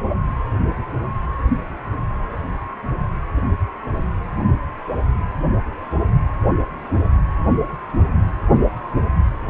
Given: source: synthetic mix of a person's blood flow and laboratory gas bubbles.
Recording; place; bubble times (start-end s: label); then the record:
Doppler ultrasound of blood flow; precordium
no bubbles
From the record:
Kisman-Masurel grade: 000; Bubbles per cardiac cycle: 0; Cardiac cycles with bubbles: 0%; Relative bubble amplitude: no bubbles discernible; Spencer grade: 0 (complete lack of bubble signals)